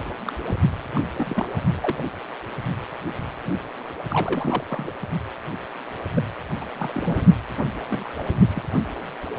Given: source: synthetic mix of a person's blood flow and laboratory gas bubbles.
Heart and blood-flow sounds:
Doppler ultrasound of blood flow; precordium
0.00-0.03 s: bubbles
0.25-0.33 s: bubbles
0.47-0.55 s: bubbles
0.93-1.01 s: bubbles
1.17-1.60 s: bubbles
1.76-2.04 s: bubbles
3.98-4.02 s: bubbles
4.09-4.64 s: bubbles
4.69-4.91 s: bubbles
6.14-6.22 s: bubbles
6.61-6.65 s: bubbles
6.78-7.36 s: bubbles
7.57-7.64 s: bubbles
7.88-8.14 s: bubbles
8.19-8.23 s: bubbles
8.54-8.62 s: bubbles
From the record:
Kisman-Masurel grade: 221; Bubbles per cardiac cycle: several, 3 to 8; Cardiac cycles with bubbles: 10 to 50%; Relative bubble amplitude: barely perceptible (0.100 to 0.250); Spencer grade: 2 (many but less than half of the cardiac periods contain bubble signals, singularly or in groups); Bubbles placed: anywhere in the cardiac cycle

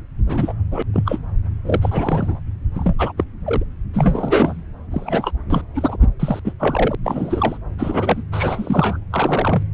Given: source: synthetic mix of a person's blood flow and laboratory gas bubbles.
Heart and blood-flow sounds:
Doppler ultrasound of blood flow; subclavian vein
0.26-0.52 s: bubbles
0.71-0.82 s: bubbles
0.93-1.19 s: bubbles
1.64-2.40 s: bubbles
2.73-2.94 s: bubbles
2.98-3.12 s: bubbles
3.17-3.24 s: bubbles
3.46-3.64 s: bubbles
3.93-4.63 s: bubbles
4.91-5.32 s: bubbles
5.50-5.62 s: bubbles
5.75-5.96 s: bubbles
6.20-6.40 s: bubbles
6.45-6.54 s: bubbles
6.59-6.95 s: bubbles
7.04-7.58 s: bubbles
7.78-8.23 s: bubbles
8.31-8.97 s: bubbles
9.11-9.62 s: bubbles
From the record:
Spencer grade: 3 (all of the cardiac periods contain showers or single bubble signals, but not dominating or overriding the cardiac motion signals); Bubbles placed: anywhere in the cardiac cycle

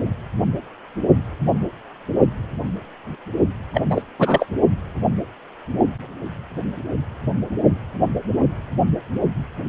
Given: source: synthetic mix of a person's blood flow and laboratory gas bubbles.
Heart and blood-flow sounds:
Doppler ultrasound of blood flow; precordium
3.73-3.81 s: bubbles
3.89-4.02 s: bubbles
4.19-4.46 s: bubbles
From the record:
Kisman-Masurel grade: 213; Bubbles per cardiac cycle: several, 3 to 8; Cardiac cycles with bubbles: 1 to 10%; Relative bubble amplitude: loud (0.450 to 0.775); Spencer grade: 1 (occasional bubble signal discernible with the cardiac motion signal, with majority of cardiac periods free of bubbles); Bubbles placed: only in the low amplitude regions of the cardiac cycle

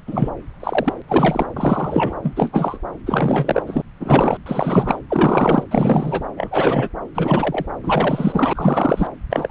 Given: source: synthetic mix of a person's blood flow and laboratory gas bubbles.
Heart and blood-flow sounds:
Doppler ultrasound of blood flow; subclavian vein
0.07-0.31 s: bubbles
0.59-0.93 s: bubbles
1.08-1.46 s: bubbles
1.56-2.15 s: bubbles
2.23-2.79 s: bubbles
3.06-3.62 s: bubbles
3.67-3.81 s: bubbles
3.99-4.37 s: bubbles
4.46-4.99 s: bubbles
5.08-5.63 s: bubbles
5.71-6.26 s: bubbles
6.36-6.88 s: bubbles
7.14-7.66 s: bubbles
7.83-9.07 s: bubbles
9.30-9.51 s: bubbles
From the record:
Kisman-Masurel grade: 343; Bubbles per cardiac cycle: rolling drumbeat, 9 or more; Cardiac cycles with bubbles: 100%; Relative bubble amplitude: loud (0.450 to 0.775); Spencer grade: 3 (all of the cardiac periods contain showers or single bubble signals, but not dominating or overriding the cardiac motion signals); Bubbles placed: anywhere in the cardiac cycle

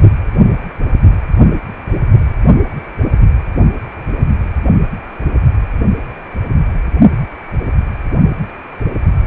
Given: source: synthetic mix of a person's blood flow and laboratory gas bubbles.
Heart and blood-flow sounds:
Doppler ultrasound of blood flow; precordium
no bubbles
From the record:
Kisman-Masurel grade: 000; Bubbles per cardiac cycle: 0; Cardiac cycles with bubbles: 0%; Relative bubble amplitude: no bubbles discernible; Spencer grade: 0 (complete lack of bubble signals)

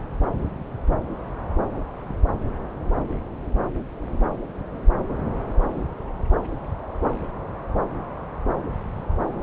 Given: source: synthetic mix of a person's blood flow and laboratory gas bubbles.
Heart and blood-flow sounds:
Doppler ultrasound of blood flow; subclavian vein
9.41-9.43 s: bubbles
From the record:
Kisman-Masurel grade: 212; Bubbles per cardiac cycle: several, 3 to 8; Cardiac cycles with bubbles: 1 to 10%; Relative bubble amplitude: moderate (0.250 to 0.450); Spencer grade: 1 (occasional bubble signal discernible with the cardiac motion signal, with majority of cardiac periods free of bubbles); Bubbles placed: anywhere in the cardiac cycle

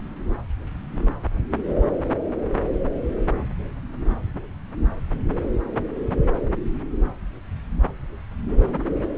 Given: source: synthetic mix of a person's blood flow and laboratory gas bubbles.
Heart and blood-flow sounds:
Doppler ultrasound of blood flow; subclavian vein
no bubbles
From the record:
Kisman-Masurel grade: 000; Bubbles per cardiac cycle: 0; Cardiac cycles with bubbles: 0%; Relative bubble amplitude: no bubbles discernible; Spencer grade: 0 (complete lack of bubble signals)

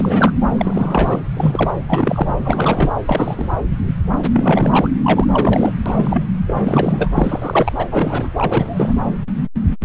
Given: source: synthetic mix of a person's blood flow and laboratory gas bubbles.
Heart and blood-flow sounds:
Doppler ultrasound of blood flow; subclavian vein
0.00-0.32 s: bubbles
0.58-1.21 s: bubbles
1.36-1.74 s: bubbles
1.88-2.33 s: bubbles
2.44-2.93 s: bubbles
3.08-3.51 s: bubbles
4.33-4.90 s: bubbles
5.04-5.26 s: bubbles
5.29-5.74 s: bubbles
5.86-6.22 s: bubbles
6.46-7.10 s: bubbles
7.16-7.72 s: bubbles
7.78-8.30 s: bubbles
8.36-8.94 s: bubbles
From the record:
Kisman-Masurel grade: 332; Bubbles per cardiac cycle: rolling drumbeat, 9 or more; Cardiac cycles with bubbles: 50 to 99%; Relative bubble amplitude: moderate (0.250 to 0.450); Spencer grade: 3 (all of the cardiac periods contain showers or single bubble signals, but not dominating or overriding the cardiac motion signals); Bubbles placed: anywhere in the cardiac cycle

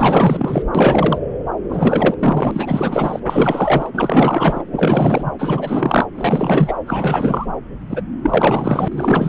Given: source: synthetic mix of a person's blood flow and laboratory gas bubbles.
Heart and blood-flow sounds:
Doppler ultrasound of blood flow; subclavian vein
0.00-0.62 s: bubbles
0.74-1.19 s: bubbles
1.69-2.15 s: bubbles
2.19-3.19 s: bubbles
3.25-3.90 s: bubbles
3.93-4.62 s: bubbles
4.73-5.31 s: bubbles
5.39-6.07 s: bubbles
6.15-6.79 s: bubbles
6.86-7.47 s: bubbles
7.89-8.01 s: bubbles
8.22-8.88 s: bubbles
8.91-9.28 s: bubbles
From the record:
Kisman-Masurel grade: 444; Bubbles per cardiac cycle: continuous sound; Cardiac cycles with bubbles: 100%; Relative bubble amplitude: maximal (0.775 to 0.999); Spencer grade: 4 (maximum detectable bubble signal sounding continuously throughout systole and diastole of every cardiac period, and overriding the amplitude of the normal cardiac signals); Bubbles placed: anywhere in the cardiac cycle

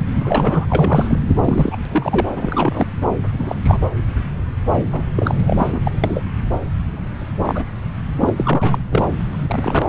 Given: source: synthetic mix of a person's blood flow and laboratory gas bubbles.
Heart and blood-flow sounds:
Doppler ultrasound of blood flow; subclavian vein
0.15-0.66 s: bubbles
0.70-1.18 s: bubbles
1.28-1.76 s: bubbles
1.85-2.27 s: bubbles
2.35-2.85 s: bubbles
3.32-3.86 s: bubbles
4.92-5.06 s: bubbles
5.16-5.39 s: bubbles
5.46-5.81 s: bubbles
5.85-5.92 s: bubbles
6.04-6.25 s: bubbles
7.45-7.64 s: bubbles
8.20-8.34 s: bubbles
8.37-8.79 s: bubbles
8.91-9.10 s: bubbles
9.31-9.86 s: bubbles
From the record:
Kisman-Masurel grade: 233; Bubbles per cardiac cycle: several, 3 to 8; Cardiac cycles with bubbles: 50 to 99%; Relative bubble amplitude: loud (0.450 to 0.775); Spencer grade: 3 (all of the cardiac periods contain showers or single bubble signals, but not dominating or overriding the cardiac motion signals); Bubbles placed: anywhere in the cardiac cycle

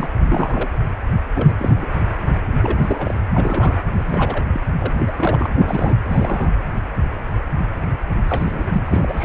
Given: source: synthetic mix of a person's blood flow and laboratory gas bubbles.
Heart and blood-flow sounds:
Doppler ultrasound of blood flow; precordium
0.00-0.08 s: bubbles
0.23-0.69 s: bubbles
1.34-1.54 s: bubbles
1.58-1.87 s: bubbles
2.62-3.15 s: bubbles
3.32-3.79 s: bubbles
3.96-4.45 s: bubbles
4.52-4.61 s: bubbles
4.79-4.95 s: bubbles
4.98-5.11 s: bubbles
5.17-5.47 s: bubbles
5.58-5.96 s: bubbles
6.04-6.53 s: bubbles
8.28-8.79 s: bubbles
8.86-9.25 s: bubbles
From the record:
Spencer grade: 3 (all of the cardiac periods contain showers or single bubble signals, but not dominating or overriding the cardiac motion signals); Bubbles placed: anywhere in the cardiac cycle

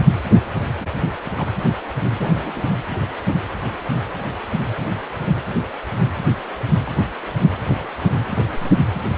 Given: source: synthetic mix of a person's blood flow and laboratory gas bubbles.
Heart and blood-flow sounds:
Doppler ultrasound of blood flow; precordium
1.25-1.31 s: bubbles
1.37-1.50 s: bubbles
2.17-2.75 s: bubbles
7.68-7.76 s: bubbles
7.79-7.95 s: bubbles
8.08-8.57 s: bubbles
8.60-8.71 s: bubbles
From the record:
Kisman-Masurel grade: 221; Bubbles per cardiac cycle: several, 3 to 8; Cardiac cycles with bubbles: 10 to 50%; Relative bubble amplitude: barely perceptible (0.100 to 0.250); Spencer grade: 2 (many but less than half of the cardiac periods contain bubble signals, singularly or in groups); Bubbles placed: anywhere in the cardiac cycle

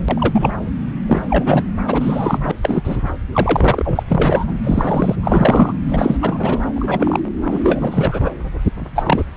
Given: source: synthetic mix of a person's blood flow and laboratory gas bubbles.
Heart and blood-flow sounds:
Doppler ultrasound of blood flow; subclavian vein
0.08-0.51 s: bubbles
1.06-1.22 s: bubbles
1.29-1.64 s: bubbles
1.87-2.51 s: bubbles
2.62-2.97 s: bubbles
3.33-4.03 s: bubbles
4.08-4.58 s: bubbles
4.63-5.15 s: bubbles
5.22-5.72 s: bubbles
5.88-6.17 s: bubbles
6.21-6.63 s: bubbles
6.75-7.19 s: bubbles
7.51-7.60 s: bubbles
7.62-8.30 s: bubbles
8.95-9.23 s: bubbles
From the record:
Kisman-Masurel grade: 243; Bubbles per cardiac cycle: several, 3 to 8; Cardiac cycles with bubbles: 100%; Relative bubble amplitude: loud (0.450 to 0.775); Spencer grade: 3 (all of the cardiac periods contain showers or single bubble signals, but not dominating or overriding the cardiac motion signals); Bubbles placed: anywhere in the cardiac cycle

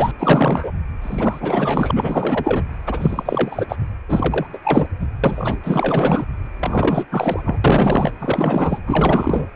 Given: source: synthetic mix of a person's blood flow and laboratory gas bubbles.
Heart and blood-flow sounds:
Doppler ultrasound of blood flow; precordium
0.00-0.11 s: bubbles
0.19-0.72 s: bubbles
1.01-1.91 s: bubbles
1.95-2.63 s: bubbles
2.86-3.66 s: bubbles
3.68-3.76 s: bubbles
4.08-4.46 s: bubbles
4.53-4.58 s: bubbles
4.65-4.87 s: bubbles
5.00-5.07 s: bubbles
5.24-5.58 s: bubbles
5.63-6.24 s: bubbles
6.60-7.04 s: bubbles
7.12-7.60 s: bubbles
7.64-8.11 s: bubbles
8.19-8.79 s: bubbles
8.86-9.47 s: bubbles
From the record:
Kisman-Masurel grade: 444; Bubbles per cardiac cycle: continuous sound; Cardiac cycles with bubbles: 100%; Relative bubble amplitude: maximal (0.775 to 0.999); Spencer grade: 4 (maximum detectable bubble signal sounding continuously throughout systole and diastole of every cardiac period, and overriding the amplitude of the normal cardiac signals); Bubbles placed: anywhere in the cardiac cycle

